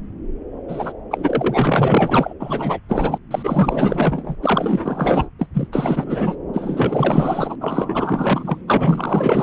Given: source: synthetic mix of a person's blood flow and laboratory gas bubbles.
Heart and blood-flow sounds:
Doppler ultrasound of blood flow; subclavian vein
0.67-0.93 s: bubbles
1.11-2.33 s: bubbles
2.40-2.79 s: bubbles
2.88-3.19 s: bubbles
3.31-4.36 s: bubbles
4.42-5.29 s: bubbles
5.38-5.47 s: bubbles
5.54-5.68 s: bubbles
5.72-6.36 s: bubbles
6.53-7.55 s: bubbles
7.61-8.62 s: bubbles
8.67-9.43 s: bubbles
From the record:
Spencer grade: 4 (maximum detectable bubble signal sounding continuously throughout systole and diastole of every cardiac period, and overriding the amplitude of the normal cardiac signals); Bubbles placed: anywhere in the cardiac cycle

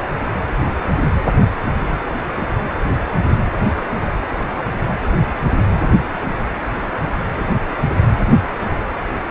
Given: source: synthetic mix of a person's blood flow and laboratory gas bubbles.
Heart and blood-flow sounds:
Doppler ultrasound of blood flow; precordium
no bubbles
From the record:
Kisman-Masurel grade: 000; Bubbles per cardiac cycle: 0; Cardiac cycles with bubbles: 0%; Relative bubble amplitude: no bubbles discernible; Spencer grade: 0 (complete lack of bubble signals)

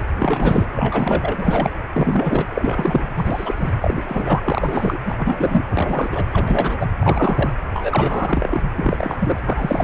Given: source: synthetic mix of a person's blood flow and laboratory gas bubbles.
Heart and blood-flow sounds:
Doppler ultrasound of blood flow; precordium
0.18-0.66 s: bubbles
0.73-1.71 s: bubbles
1.93-2.46 s: bubbles
2.55-3.06 s: bubbles
3.17-3.70 s: bubbles
3.81-4.42 s: bubbles
4.45-4.98 s: bubbles
5.06-5.15 s: bubbles
5.17-5.65 s: bubbles
5.70-6.25 s: bubbles
6.31-6.87 s: bubbles
7.00-7.53 s: bubbles
7.74-8.62 s: bubbles
8.76-9.40 s: bubbles
9.46-9.84 s: bubbles
From the record:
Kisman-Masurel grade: 343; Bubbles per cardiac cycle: rolling drumbeat, 9 or more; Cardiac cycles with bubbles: 100%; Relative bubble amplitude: loud (0.450 to 0.775); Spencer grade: 3 (all of the cardiac periods contain showers or single bubble signals, but not dominating or overriding the cardiac motion signals); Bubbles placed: anywhere in the cardiac cycle

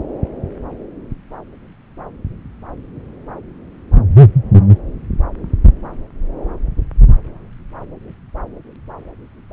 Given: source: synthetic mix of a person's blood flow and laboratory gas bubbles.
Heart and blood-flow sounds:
Doppler ultrasound of blood flow; subclavian vein
no bubbles
From the record:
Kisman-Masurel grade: 000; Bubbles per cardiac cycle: 0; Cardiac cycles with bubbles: 0%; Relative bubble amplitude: no bubbles discernible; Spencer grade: 0 (complete lack of bubble signals)

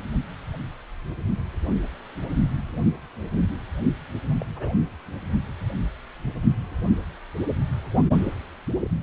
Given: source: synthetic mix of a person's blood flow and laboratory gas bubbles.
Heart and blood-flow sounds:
Doppler ultrasound of blood flow; precordium
4.40-4.45 s: bubbles
4.55-4.72 s: bubbles
From the record:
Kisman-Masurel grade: 111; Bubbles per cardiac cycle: 1 to 2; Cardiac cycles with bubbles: 1 to 10%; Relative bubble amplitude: barely perceptible (0.100 to 0.250); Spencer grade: 1 (occasional bubble signal discernible with the cardiac motion signal, with majority of cardiac periods free of bubbles); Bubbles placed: only in the low amplitude regions of the cardiac cycle

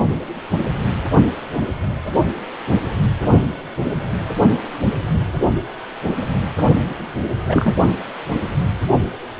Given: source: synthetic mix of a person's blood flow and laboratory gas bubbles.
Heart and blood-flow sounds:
Doppler ultrasound of blood flow; precordium
7.47-7.74 s: bubbles
From the record:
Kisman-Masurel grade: 123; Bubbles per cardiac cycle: 1 to 2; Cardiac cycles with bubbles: 10 to 50%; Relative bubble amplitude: loud (0.450 to 0.775); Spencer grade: 2 (many but less than half of the cardiac periods contain bubble signals, singularly or in groups); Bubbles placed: only in the low amplitude regions of the cardiac cycle

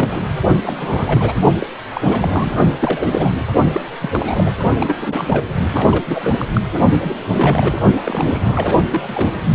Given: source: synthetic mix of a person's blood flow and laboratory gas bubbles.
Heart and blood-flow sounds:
Doppler ultrasound of blood flow; precordium
0.00-0.24 s: bubbles
0.62-1.41 s: bubbles
1.59-1.67 s: bubbles
1.91-2.01 s: bubbles
2.04-2.53 s: bubbles
2.81-3.45 s: bubbles
3.72-3.82 s: bubbles
4.02-4.53 s: bubbles
4.80-5.44 s: bubbles
5.73-6.35 s: bubbles
6.39-6.45 s: bubbles
6.53-6.61 s: bubbles
7.01-7.81 s: bubbles
7.97-8.85 s: bubbles
8.90-9.30 s: bubbles
From the record:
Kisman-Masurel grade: 342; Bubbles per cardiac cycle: rolling drumbeat, 9 or more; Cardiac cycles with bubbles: 100%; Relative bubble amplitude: moderate (0.250 to 0.450); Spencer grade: 3 (all of the cardiac periods contain showers or single bubble signals, but not dominating or overriding the cardiac motion signals); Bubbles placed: only in the low amplitude regions of the cardiac cycle

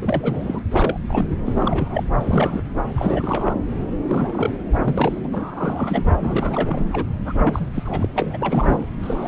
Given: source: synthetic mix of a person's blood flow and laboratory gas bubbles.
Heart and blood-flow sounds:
Doppler ultrasound of blood flow; subclavian vein
0.02-0.61 s: bubbles
0.70-1.00 s: bubbles
1.02-1.25 s: bubbles
1.46-1.53 s: bubbles
1.56-2.03 s: bubbles
2.19-2.61 s: bubbles
2.96-3.54 s: bubbles
4.08-4.50 s: bubbles
4.73-4.78 s: bubbles
4.83-5.21 s: bubbles
5.24-5.29 s: bubbles
5.32-6.12 s: bubbles
6.19-6.89 s: bubbles
6.92-7.05 s: bubbles
7.25-7.32 s: bubbles
7.44-7.67 s: bubbles
7.74-8.08 s: bubbles
8.14-8.87 s: bubbles
9.02-9.28 s: bubbles
From the record:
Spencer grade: 3 (all of the cardiac periods contain showers or single bubble signals, but not dominating or overriding the cardiac motion signals); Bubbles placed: anywhere in the cardiac cycle

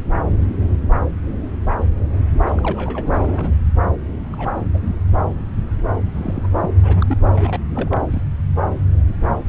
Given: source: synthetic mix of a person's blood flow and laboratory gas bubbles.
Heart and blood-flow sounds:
Doppler ultrasound of blood flow; subclavian vein
2.44-3.52 s: bubbles
4.30-4.55 s: bubbles
4.74-4.96 s: bubbles
6.14-6.49 s: bubbles
6.62-6.69 s: bubbles
6.83-7.18 s: bubbles
7.32-7.59 s: bubbles
7.71-7.98 s: bubbles
8.11-8.24 s: bubbles
From the record:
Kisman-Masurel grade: 221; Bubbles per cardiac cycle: several, 3 to 8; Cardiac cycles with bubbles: 10 to 50%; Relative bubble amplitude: barely perceptible (0.100 to 0.250); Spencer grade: 2 (many but less than half of the cardiac periods contain bubble signals, singularly or in groups); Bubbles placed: anywhere in the cardiac cycle

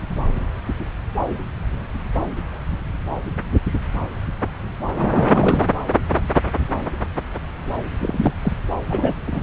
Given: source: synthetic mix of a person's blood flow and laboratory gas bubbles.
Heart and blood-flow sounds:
Doppler ultrasound of blood flow; subclavian vein
4.99-5.66 s: bubbles
8.00-8.31 s: bubbles
8.42-8.53 s: bubbles
8.86-9.13 s: bubbles
9.27-9.43 s: bubbles
From the record:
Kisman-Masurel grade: 222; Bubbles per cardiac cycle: several, 3 to 8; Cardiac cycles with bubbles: 10 to 50%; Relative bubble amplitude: moderate (0.250 to 0.450); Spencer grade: 2 (many but less than half of the cardiac periods contain bubble signals, singularly or in groups); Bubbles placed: anywhere in the cardiac cycle

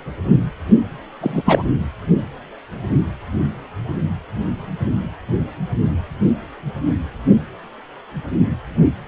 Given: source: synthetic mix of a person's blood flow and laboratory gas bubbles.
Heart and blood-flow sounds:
Doppler ultrasound of blood flow; precordium
1.21-1.43 s: bubbles
1.45-1.64 s: bubbles
From the record:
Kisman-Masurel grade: 213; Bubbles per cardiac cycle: several, 3 to 8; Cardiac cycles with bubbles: 1 to 10%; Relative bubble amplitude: loud (0.450 to 0.775); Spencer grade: 1 (occasional bubble signal discernible with the cardiac motion signal, with majority of cardiac periods free of bubbles); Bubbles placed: anywhere in the cardiac cycle

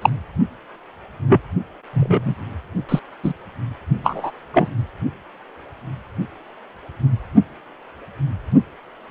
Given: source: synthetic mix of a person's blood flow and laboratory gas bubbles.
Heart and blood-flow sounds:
Doppler ultrasound of blood flow; precordium
0.02-0.10 s: bubbles
1.29-1.41 s: bubbles
1.93-2.34 s: bubbles
2.88-3.00 s: bubbles
3.23-3.33 s: bubbles
4.04-4.31 s: bubbles
4.53-4.68 s: bubbles
From the record:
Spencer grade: 2 (many but less than half of the cardiac periods contain bubble signals, singularly or in groups); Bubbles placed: only in the low amplitude regions of the cardiac cycle

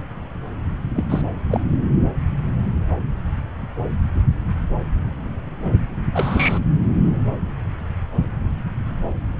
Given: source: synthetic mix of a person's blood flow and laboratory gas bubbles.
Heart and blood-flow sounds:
Doppler ultrasound of blood flow; subclavian vein
0.96-1.04 s: bubbles
1.09-1.22 s: bubbles
1.50-1.60 s: bubbles
6.13-6.59 s: bubbles
From the record:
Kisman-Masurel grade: 122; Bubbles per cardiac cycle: 1 to 2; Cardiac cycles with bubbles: 10 to 50%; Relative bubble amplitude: moderate (0.250 to 0.450); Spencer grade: 2 (many but less than half of the cardiac periods contain bubble signals, singularly or in groups); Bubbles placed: anywhere in the cardiac cycle

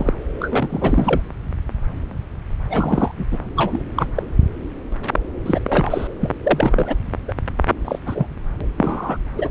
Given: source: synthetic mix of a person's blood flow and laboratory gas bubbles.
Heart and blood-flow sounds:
Doppler ultrasound of blood flow; subclavian vein
0.00-0.14 s: bubbles
0.40-1.21 s: bubbles
2.69-3.12 s: bubbles
3.17-3.25 s: bubbles
3.31-3.39 s: bubbles
3.56-3.83 s: bubbles
3.95-4.07 s: bubbles
4.15-4.23 s: bubbles
5.46-5.59 s: bubbles
5.67-6.08 s: bubbles
6.21-6.30 s: bubbles
6.42-6.95 s: bubbles
7.28-7.33 s: bubbles
7.85-7.98 s: bubbles
8.06-8.27 s: bubbles
8.61-8.65 s: bubbles
8.78-9.18 s: bubbles
9.37-9.48 s: bubbles
From the record:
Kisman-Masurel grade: 232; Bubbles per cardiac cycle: several, 3 to 8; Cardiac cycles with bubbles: 50 to 99%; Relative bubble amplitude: moderate (0.250 to 0.450); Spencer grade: 3 (all of the cardiac periods contain showers or single bubble signals, but not dominating or overriding the cardiac motion signals); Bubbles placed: anywhere in the cardiac cycle

